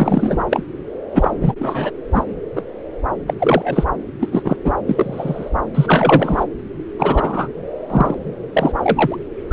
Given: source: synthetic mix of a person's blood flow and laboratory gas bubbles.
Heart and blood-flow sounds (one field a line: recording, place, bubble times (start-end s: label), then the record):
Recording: Doppler ultrasound of blood flow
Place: subclavian vein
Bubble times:
0.00-0.44 s: bubbles
0.50-0.63 s: bubbles
1.14-1.30 s: bubbles
1.41-1.52 s: bubbles
1.59-1.91 s: bubbles
2.14-2.25 s: bubbles
2.56-2.63 s: bubbles
3.27-3.33 s: bubbles
3.38-3.84 s: bubbles
4.20-4.56 s: bubbles
4.64-4.72 s: bubbles
4.87-5.50 s: bubbles
5.75-6.45 s: bubbles
6.98-7.48 s: bubbles
7.90-8.15 s: bubbles
8.53-8.72 s: bubbles
8.77-9.16 s: bubbles
9.50-9.53 s: bubbles
From the record:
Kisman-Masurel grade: 233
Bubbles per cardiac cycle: several, 3 to 8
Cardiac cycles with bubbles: 50 to 99%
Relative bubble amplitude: loud (0.450 to 0.775)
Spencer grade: 3 (all of the cardiac periods contain showers or single bubble signals, but not dominating or overriding the cardiac motion signals)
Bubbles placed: anywhere in the cardiac cycle